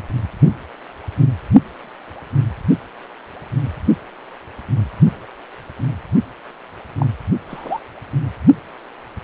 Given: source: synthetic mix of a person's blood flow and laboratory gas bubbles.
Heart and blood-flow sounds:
Doppler ultrasound of blood flow; precordium
6.98-7.06 s: bubbles
7.48-7.80 s: bubbles
From the record:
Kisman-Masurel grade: 122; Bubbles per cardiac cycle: 1 to 2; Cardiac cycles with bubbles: 10 to 50%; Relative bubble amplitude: moderate (0.250 to 0.450); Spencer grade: 2 (many but less than half of the cardiac periods contain bubble signals, singularly or in groups); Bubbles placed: only in the low amplitude regions of the cardiac cycle

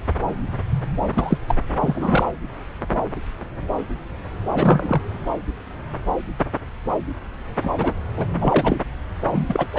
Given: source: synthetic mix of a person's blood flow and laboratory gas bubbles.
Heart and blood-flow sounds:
Doppler ultrasound of blood flow; subclavian vein
1.12-1.38 s: bubbles
1.47-1.56 s: bubbles
1.80-2.23 s: bubbles
4.50-5.01 s: bubbles
7.62-7.94 s: bubbles
8.16-8.26 s: bubbles
8.40-8.78 s: bubbles
9.30-9.67 s: bubbles
9.71-9.79 s: bubbles
From the record:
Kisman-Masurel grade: 233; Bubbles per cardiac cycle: several, 3 to 8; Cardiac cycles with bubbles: 50 to 99%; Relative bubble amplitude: loud (0.450 to 0.775); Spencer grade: 3 (all of the cardiac periods contain showers or single bubble signals, but not dominating or overriding the cardiac motion signals); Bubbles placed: anywhere in the cardiac cycle

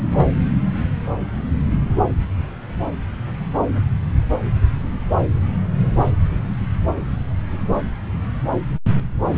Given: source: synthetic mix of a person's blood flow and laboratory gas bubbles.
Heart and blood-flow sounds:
Doppler ultrasound of blood flow; subclavian vein
0.12-0.26 s: bubbles
From the record:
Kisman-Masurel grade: 112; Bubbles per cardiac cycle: 1 to 2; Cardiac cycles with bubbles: 1 to 10%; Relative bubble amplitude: moderate (0.250 to 0.450); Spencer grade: 1 (occasional bubble signal discernible with the cardiac motion signal, with majority of cardiac periods free of bubbles); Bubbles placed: anywhere in the cardiac cycle

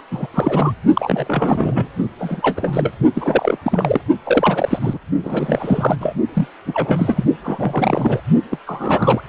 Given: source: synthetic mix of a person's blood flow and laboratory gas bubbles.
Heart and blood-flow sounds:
Doppler ultrasound of blood flow; precordium
0.11-0.27 s: bubbles
0.34-0.72 s: bubbles
0.94-1.89 s: bubbles
2.18-2.92 s: bubbles
3.14-3.57 s: bubbles
3.62-4.01 s: bubbles
4.23-4.97 s: bubbles
5.22-5.96 s: bubbles
6.00-6.16 s: bubbles
6.33-6.47 s: bubbles
6.65-7.25 s: bubbles
7.43-8.21 s: bubbles
8.51-8.58 s: bubbles
8.66-9.21 s: bubbles
From the record:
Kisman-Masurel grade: 332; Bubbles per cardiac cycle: rolling drumbeat, 9 or more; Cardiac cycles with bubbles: 50 to 99%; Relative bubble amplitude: moderate (0.250 to 0.450); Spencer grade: 3 (all of the cardiac periods contain showers or single bubble signals, but not dominating or overriding the cardiac motion signals); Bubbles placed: only in the low amplitude regions of the cardiac cycle

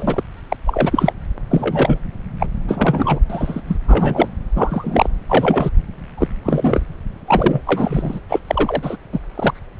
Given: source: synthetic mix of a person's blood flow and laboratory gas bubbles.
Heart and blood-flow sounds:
Doppler ultrasound of blood flow; subclavian vein
0.00-0.22 s: bubbles
0.48-0.57 s: bubbles
0.66-1.12 s: bubbles
1.50-1.99 s: bubbles
2.39-2.47 s: bubbles
2.68-3.19 s: bubbles
3.29-3.62 s: bubbles
3.67-3.77 s: bubbles
3.88-4.28 s: bubbles
4.55-5.08 s: bubbles
5.29-5.70 s: bubbles
6.17-6.28 s: bubbles
6.45-6.86 s: bubbles
7.27-7.61 s: bubbles
7.67-8.21 s: bubbles
8.29-8.39 s: bubbles
8.47-8.96 s: bubbles
9.12-9.20 s: bubbles
9.36-9.54 s: bubbles
From the record:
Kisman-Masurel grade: 243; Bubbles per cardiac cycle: several, 3 to 8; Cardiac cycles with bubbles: 100%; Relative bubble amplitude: loud (0.450 to 0.775); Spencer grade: 3 (all of the cardiac periods contain showers or single bubble signals, but not dominating or overriding the cardiac motion signals); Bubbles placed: anywhere in the cardiac cycle

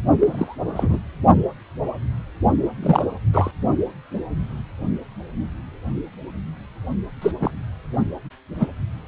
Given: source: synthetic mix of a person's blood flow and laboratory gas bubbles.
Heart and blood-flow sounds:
Doppler ultrasound of blood flow; precordium
0.17-0.55 s: bubbles
0.76-0.99 s: bubbles
2.82-3.05 s: bubbles
3.33-3.51 s: bubbles
7.21-7.31 s: bubbles
7.40-7.50 s: bubbles
8.59-8.68 s: bubbles
From the record:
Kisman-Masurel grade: 222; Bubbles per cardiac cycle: several, 3 to 8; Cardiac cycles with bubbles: 10 to 50%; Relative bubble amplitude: moderate (0.250 to 0.450); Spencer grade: 2 (many but less than half of the cardiac periods contain bubble signals, singularly or in groups); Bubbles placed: only in the low amplitude regions of the cardiac cycle

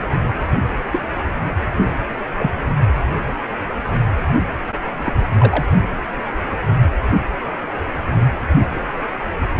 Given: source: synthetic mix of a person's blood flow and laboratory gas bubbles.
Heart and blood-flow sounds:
Doppler ultrasound of blood flow; precordium
0.92-1.03 s: bubbles
1.78-1.91 s: bubbles
2.38-2.50 s: bubbles
5.03-5.13 s: bubbles
5.38-5.66 s: bubbles
From the record:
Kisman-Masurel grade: 122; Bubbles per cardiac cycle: 1 to 2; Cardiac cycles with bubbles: 10 to 50%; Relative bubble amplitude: moderate (0.250 to 0.450); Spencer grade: 2 (many but less than half of the cardiac periods contain bubble signals, singularly or in groups); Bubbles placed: anywhere in the cardiac cycle

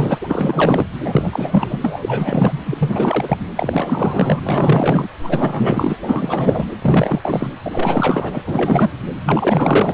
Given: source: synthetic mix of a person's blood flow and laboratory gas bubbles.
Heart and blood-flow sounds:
Doppler ultrasound of blood flow; precordium
0.00-0.18 s: bubbles
0.21-0.86 s: bubbles
1.04-1.77 s: bubbles
1.80-2.58 s: bubbles
2.65-3.38 s: bubbles
3.56-4.40 s: bubbles
4.43-5.09 s: bubbles
5.23-5.97 s: bubbles
6.01-6.66 s: bubbles
6.82-7.48 s: bubbles
7.64-8.41 s: bubbles
8.46-8.90 s: bubbles
9.26-9.94 s: bubbles
From the record:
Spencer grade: 4 (maximum detectable bubble signal sounding continuously throughout systole and diastole of every cardiac period, and overriding the amplitude of the normal cardiac signals); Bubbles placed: anywhere in the cardiac cycle

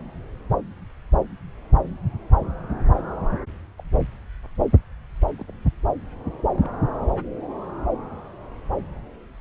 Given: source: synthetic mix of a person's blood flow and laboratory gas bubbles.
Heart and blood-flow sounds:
Doppler ultrasound of blood flow; subclavian vein
3.78-3.83 s: bubbles
5.31-5.54 s: bubbles
6.33-6.37 s: bubbles
6.41-6.50 s: bubbles
6.53-6.67 s: bubbles
6.92-6.96 s: bubbles
7.02-7.07 s: bubbles
From the record:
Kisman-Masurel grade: 121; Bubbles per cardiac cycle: 1 to 2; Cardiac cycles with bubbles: 10 to 50%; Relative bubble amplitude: barely perceptible (0.100 to 0.250); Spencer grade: 2 (many but less than half of the cardiac periods contain bubble signals, singularly or in groups); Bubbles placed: anywhere in the cardiac cycle

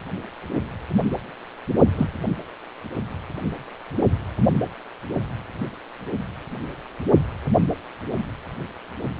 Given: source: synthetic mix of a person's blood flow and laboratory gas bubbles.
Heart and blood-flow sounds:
Doppler ultrasound of blood flow; precordium
1.97-2.07 s: bubbles
From the record:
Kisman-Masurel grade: 122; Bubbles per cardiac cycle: 1 to 2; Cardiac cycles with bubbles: 10 to 50%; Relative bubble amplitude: moderate (0.250 to 0.450); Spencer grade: 2 (many but less than half of the cardiac periods contain bubble signals, singularly or in groups); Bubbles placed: only in the low amplitude regions of the cardiac cycle

